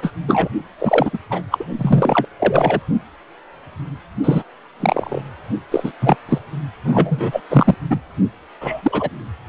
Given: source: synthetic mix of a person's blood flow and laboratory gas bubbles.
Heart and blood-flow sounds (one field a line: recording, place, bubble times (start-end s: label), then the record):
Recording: Doppler ultrasound of blood flow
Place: precordium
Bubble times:
0.00-0.13 s: bubbles
0.28-0.48 s: bubbles
0.78-1.18 s: bubbles
1.30-1.42 s: bubbles
1.52-1.65 s: bubbles
1.78-2.27 s: bubbles
2.40-2.80 s: bubbles
4.23-4.43 s: bubbles
4.80-5.21 s: bubbles
5.71-5.92 s: bubbles
6.00-6.16 s: bubbles
6.28-6.38 s: bubbles
6.84-7.40 s: bubbles
7.50-7.74 s: bubbles
7.90-7.99 s: bubbles
8.61-9.09 s: bubbles
From the record:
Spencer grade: 3 (all of the cardiac periods contain showers or single bubble signals, but not dominating or overriding the cardiac motion signals)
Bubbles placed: only in the low amplitude regions of the cardiac cycle